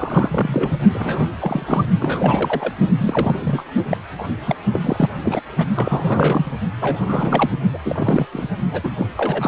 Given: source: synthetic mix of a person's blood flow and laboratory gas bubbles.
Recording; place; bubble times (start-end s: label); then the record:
Doppler ultrasound of blood flow; precordium
0.00-0.72 s: bubbles
0.94-1.27 s: bubbles
1.41-1.85 s: bubbles
2.00-2.73 s: bubbles
2.98-3.64 s: bubbles
3.90-3.97 s: bubbles
4.17-4.25 s: bubbles
4.47-4.55 s: bubbles
4.71-4.79 s: bubbles
4.82-5.09 s: bubbles
5.22-5.41 s: bubbles
5.58-5.67 s: bubbles
5.75-6.52 s: bubbles
6.81-7.50 s: bubbles
7.74-7.78 s: bubbles
7.85-8.27 s: bubbles
8.32-8.47 s: bubbles
8.72-8.90 s: bubbles
8.97-9.06 s: bubbles
9.16-9.48 s: bubbles
From the record:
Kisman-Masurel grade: 342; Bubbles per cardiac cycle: rolling drumbeat, 9 or more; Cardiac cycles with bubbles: 100%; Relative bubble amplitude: moderate (0.250 to 0.450); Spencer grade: 3 (all of the cardiac periods contain showers or single bubble signals, but not dominating or overriding the cardiac motion signals); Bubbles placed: only in the low amplitude regions of the cardiac cycle